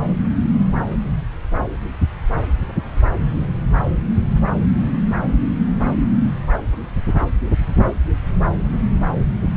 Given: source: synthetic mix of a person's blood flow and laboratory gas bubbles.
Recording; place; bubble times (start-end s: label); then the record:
Doppler ultrasound of blood flow; subclavian vein
no bubbles
From the record:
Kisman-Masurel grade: 000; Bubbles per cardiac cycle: 0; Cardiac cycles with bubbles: 0%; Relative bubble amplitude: no bubbles discernible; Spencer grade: 0 (complete lack of bubble signals)